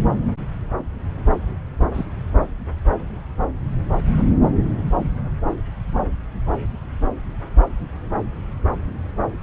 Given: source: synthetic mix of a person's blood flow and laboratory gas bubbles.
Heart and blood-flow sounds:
Doppler ultrasound of blood flow; subclavian vein
1.93-2.05 s: bubbles
From the record:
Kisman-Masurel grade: 122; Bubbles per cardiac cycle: 1 to 2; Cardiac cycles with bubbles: 10 to 50%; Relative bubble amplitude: moderate (0.250 to 0.450); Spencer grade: 2 (many but less than half of the cardiac periods contain bubble signals, singularly or in groups); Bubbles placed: anywhere in the cardiac cycle

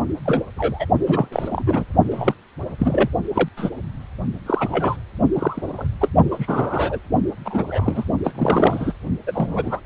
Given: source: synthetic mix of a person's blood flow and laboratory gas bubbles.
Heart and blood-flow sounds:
Doppler ultrasound of blood flow; precordium
0.25-0.42 s: bubbles
0.56-0.86 s: bubbles
1.06-1.28 s: bubbles
1.32-1.84 s: bubbles
2.11-2.34 s: bubbles
2.79-3.09 s: bubbles
3.34-3.49 s: bubbles
3.57-3.70 s: bubbles
4.46-4.96 s: bubbles
5.34-5.88 s: bubbles
6.00-6.08 s: bubbles
6.31-6.99 s: bubbles
7.45-8.04 s: bubbles
8.24-8.32 s: bubbles
8.35-8.93 s: bubbles
9.27-9.80 s: bubbles
From the record:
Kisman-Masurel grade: 242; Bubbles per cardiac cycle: several, 3 to 8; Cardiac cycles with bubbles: 100%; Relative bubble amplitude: moderate (0.250 to 0.450); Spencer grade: 3 (all of the cardiac periods contain showers or single bubble signals, but not dominating or overriding the cardiac motion signals); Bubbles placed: only in the low amplitude regions of the cardiac cycle

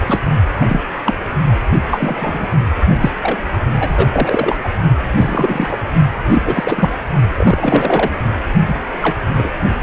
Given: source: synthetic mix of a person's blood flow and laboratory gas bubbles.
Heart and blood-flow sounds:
Doppler ultrasound of blood flow; precordium
0.07-0.20 s: bubbles
0.59-0.83 s: bubbles
1.04-1.15 s: bubbles
1.91-2.48 s: bubbles
3.00-3.11 s: bubbles
3.22-3.38 s: bubbles
3.71-4.07 s: bubbles
4.12-4.69 s: bubbles
5.17-5.80 s: bubbles
6.28-6.42 s: bubbles
6.45-6.89 s: bubbles
7.37-8.18 s: bubbles
8.68-8.74 s: bubbles
9.02-9.16 s: bubbles
9.37-9.52 s: bubbles
From the record:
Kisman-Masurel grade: 243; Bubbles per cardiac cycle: several, 3 to 8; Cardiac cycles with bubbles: 100%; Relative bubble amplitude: loud (0.450 to 0.775); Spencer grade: 3 (all of the cardiac periods contain showers or single bubble signals, but not dominating or overriding the cardiac motion signals); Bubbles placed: only in the low amplitude regions of the cardiac cycle

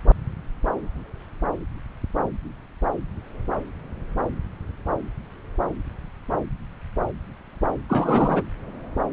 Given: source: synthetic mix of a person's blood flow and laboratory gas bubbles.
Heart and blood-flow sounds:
Doppler ultrasound of blood flow; subclavian vein
7.89-8.41 s: bubbles
From the record:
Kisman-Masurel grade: 113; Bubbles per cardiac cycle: 1 to 2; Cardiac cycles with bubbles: 1 to 10%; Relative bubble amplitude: loud (0.450 to 0.775); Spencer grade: 1 (occasional bubble signal discernible with the cardiac motion signal, with majority of cardiac periods free of bubbles); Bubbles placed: anywhere in the cardiac cycle

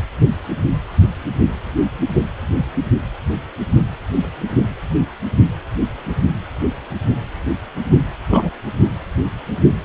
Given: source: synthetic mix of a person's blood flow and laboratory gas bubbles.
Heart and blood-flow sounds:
Doppler ultrasound of blood flow; precordium
8.30-8.50 s: bubbles
From the record:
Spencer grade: 1 (occasional bubble signal discernible with the cardiac motion signal, with majority of cardiac periods free of bubbles); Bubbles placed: only in the low amplitude regions of the cardiac cycle

